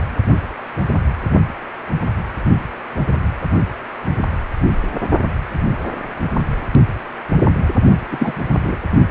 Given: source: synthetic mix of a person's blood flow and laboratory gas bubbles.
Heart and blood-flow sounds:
Doppler ultrasound of blood flow; precordium
8.11-8.33 s: bubbles
8.64-8.78 s: bubbles
From the record:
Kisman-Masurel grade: 212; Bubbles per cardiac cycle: several, 3 to 8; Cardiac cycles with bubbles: 1 to 10%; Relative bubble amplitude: moderate (0.250 to 0.450); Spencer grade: 1 (occasional bubble signal discernible with the cardiac motion signal, with majority of cardiac periods free of bubbles); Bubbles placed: only in the low amplitude regions of the cardiac cycle

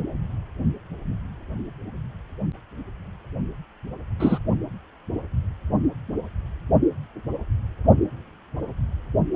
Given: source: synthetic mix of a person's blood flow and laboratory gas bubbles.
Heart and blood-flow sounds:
Doppler ultrasound of blood flow; precordium
4.19-4.38 s: bubbles
From the record:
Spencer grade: 1 (occasional bubble signal discernible with the cardiac motion signal, with majority of cardiac periods free of bubbles); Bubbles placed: only in the low amplitude regions of the cardiac cycle

